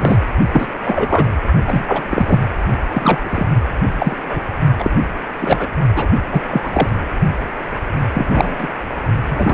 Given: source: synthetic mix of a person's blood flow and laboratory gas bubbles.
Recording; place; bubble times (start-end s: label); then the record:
Doppler ultrasound of blood flow; precordium
0.00-0.20 s: bubbles
0.52-0.68 s: bubbles
0.84-1.37 s: bubbles
1.67-2.03 s: bubbles
2.10-2.40 s: bubbles
2.91-3.48 s: bubbles
3.99-4.17 s: bubbles
4.29-4.40 s: bubbles
4.78-4.90 s: bubbles
5.40-5.67 s: bubbles
5.95-6.07 s: bubbles
6.31-6.41 s: bubbles
6.46-6.89 s: bubbles
8.14-8.55 s: bubbles
8.58-8.67 s: bubbles
9.30-9.54 s: bubbles
From the record:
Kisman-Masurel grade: 243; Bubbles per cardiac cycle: several, 3 to 8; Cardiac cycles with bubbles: 100%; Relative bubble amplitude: loud (0.450 to 0.775); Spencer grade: 3 (all of the cardiac periods contain showers or single bubble signals, but not dominating or overriding the cardiac motion signals); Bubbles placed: only in the low amplitude regions of the cardiac cycle